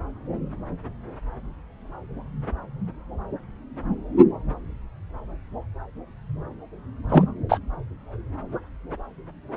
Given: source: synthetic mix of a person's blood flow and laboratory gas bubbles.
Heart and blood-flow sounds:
Doppler ultrasound of blood flow; subclavian vein
7.09-7.25 s: bubbles
7.49-7.58 s: bubbles
From the record:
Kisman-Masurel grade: 213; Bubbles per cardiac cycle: several, 3 to 8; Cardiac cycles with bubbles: 1 to 10%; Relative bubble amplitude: loud (0.450 to 0.775); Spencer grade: 1 (occasional bubble signal discernible with the cardiac motion signal, with majority of cardiac periods free of bubbles); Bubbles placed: anywhere in the cardiac cycle

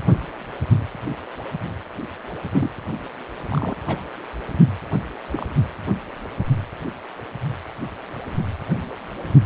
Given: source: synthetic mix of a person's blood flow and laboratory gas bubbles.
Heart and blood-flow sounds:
Doppler ultrasound of blood flow; precordium
2.52-2.70 s: bubbles
3.48-3.77 s: bubbles
3.86-4.02 s: bubbles
5.32-5.47 s: bubbles
From the record:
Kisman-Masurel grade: 121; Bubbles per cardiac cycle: 1 to 2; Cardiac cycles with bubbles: 10 to 50%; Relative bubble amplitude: barely perceptible (0.100 to 0.250); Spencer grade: 2 (many but less than half of the cardiac periods contain bubble signals, singularly or in groups); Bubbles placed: anywhere in the cardiac cycle

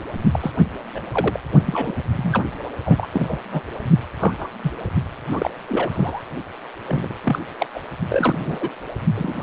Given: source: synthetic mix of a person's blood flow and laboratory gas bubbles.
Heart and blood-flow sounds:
Doppler ultrasound of blood flow; precordium
0.32-0.52 s: bubbles
0.94-0.99 s: bubbles
1.12-1.40 s: bubbles
1.66-1.94 s: bubbles
2.12-2.43 s: bubbles
2.84-3.07 s: bubbles
3.13-3.38 s: bubbles
3.51-3.61 s: bubbles
4.18-4.49 s: bubbles
4.63-4.71 s: bubbles
5.29-5.50 s: bubbles
5.68-6.22 s: bubbles
6.87-7.14 s: bubbles
7.24-7.39 s: bubbles
7.59-7.67 s: bubbles
7.74-7.79 s: bubbles
8.10-8.69 s: bubbles
9.15-9.43 s: bubbles
From the record:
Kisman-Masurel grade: 242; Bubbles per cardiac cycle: several, 3 to 8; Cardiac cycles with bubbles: 100%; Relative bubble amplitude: moderate (0.250 to 0.450); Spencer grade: 3 (all of the cardiac periods contain showers or single bubble signals, but not dominating or overriding the cardiac motion signals); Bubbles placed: only in the low amplitude regions of the cardiac cycle

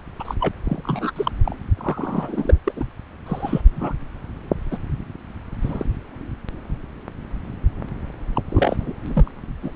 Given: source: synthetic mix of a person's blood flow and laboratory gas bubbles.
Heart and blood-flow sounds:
Doppler ultrasound of blood flow; subclavian vein
0.19-0.34 s: bubbles
0.40-0.48 s: bubbles
0.65-1.12 s: bubbles
1.15-1.31 s: bubbles
1.44-1.56 s: bubbles
1.77-2.58 s: bubbles
2.65-2.72 s: bubbles
2.76-2.85 s: bubbles
3.26-3.62 s: bubbles
3.75-3.94 s: bubbles
4.71-4.78 s: bubbles
5.61-5.86 s: bubbles
8.34-8.41 s: bubbles
8.49-8.76 s: bubbles
8.79-8.92 s: bubbles
9.06-9.31 s: bubbles
9.62-9.71 s: bubbles
From the record:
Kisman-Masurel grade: 232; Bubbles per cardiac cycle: several, 3 to 8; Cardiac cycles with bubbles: 50 to 99%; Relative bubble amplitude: moderate (0.250 to 0.450); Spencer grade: 3 (all of the cardiac periods contain showers or single bubble signals, but not dominating or overriding the cardiac motion signals); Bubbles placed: anywhere in the cardiac cycle

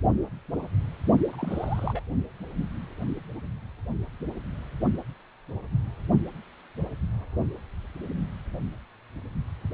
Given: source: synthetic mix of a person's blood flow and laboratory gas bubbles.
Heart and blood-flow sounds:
Doppler ultrasound of blood flow; precordium
1.32-2.02 s: bubbles
From the record:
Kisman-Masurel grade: 221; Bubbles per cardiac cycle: several, 3 to 8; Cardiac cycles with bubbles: 10 to 50%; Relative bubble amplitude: barely perceptible (0.100 to 0.250); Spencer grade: 2 (many but less than half of the cardiac periods contain bubble signals, singularly or in groups); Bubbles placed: only in the low amplitude regions of the cardiac cycle

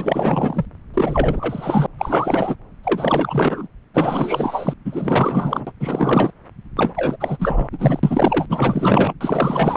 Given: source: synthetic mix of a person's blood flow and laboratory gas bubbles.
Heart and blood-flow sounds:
Doppler ultrasound of blood flow; subclavian vein
0.00-0.65 s: bubbles
0.93-1.87 s: bubbles
1.98-2.56 s: bubbles
2.83-3.68 s: bubbles
3.94-4.74 s: bubbles
4.84-5.72 s: bubbles
5.80-6.30 s: bubbles
6.76-6.94 s: bubbles
6.96-7.17 s: bubbles
7.20-7.69 s: bubbles
7.72-8.00 s: bubbles
8.03-8.46 s: bubbles
8.49-9.13 s: bubbles
9.20-9.76 s: bubbles
From the record:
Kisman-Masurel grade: 444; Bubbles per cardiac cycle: continuous sound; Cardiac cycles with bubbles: 100%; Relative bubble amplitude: maximal (0.775 to 0.999); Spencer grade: 4 (maximum detectable bubble signal sounding continuously throughout systole and diastole of every cardiac period, and overriding the amplitude of the normal cardiac signals); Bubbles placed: anywhere in the cardiac cycle

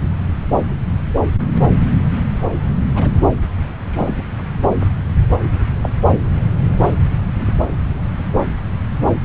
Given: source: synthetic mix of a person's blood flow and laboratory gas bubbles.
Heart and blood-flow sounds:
Doppler ultrasound of blood flow; subclavian vein
2.94-3.11 s: bubbles
3.90-4.23 s: bubbles
5.83-5.89 s: bubbles
7.39-7.54 s: bubbles
From the record:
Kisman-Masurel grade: 122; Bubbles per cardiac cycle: 1 to 2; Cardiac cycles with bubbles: 10 to 50%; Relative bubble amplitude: moderate (0.250 to 0.450); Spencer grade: 2 (many but less than half of the cardiac periods contain bubble signals, singularly or in groups); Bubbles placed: anywhere in the cardiac cycle

